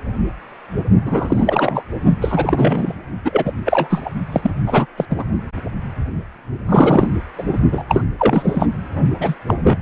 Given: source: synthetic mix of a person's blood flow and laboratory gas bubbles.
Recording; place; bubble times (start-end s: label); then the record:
Doppler ultrasound of blood flow; precordium
1.04-1.83 s: bubbles
2.21-2.94 s: bubbles
3.24-3.53 s: bubbles
3.65-4.09 s: bubbles
4.32-4.50 s: bubbles
4.67-4.86 s: bubbles
4.97-5.05 s: bubbles
5.09-5.24 s: bubbles
6.69-7.08 s: bubbles
7.36-7.61 s: bubbles
7.72-7.83 s: bubbles
7.88-8.05 s: bubbles
8.19-8.67 s: bubbles
9.20-9.34 s: bubbles
9.47-9.54 s: bubbles
9.63-9.77 s: bubbles
From the record:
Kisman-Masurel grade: 333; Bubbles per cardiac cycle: rolling drumbeat, 9 or more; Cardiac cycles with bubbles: 50 to 99%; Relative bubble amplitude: loud (0.450 to 0.775); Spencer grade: 3 (all of the cardiac periods contain showers or single bubble signals, but not dominating or overriding the cardiac motion signals); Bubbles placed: only in the low amplitude regions of the cardiac cycle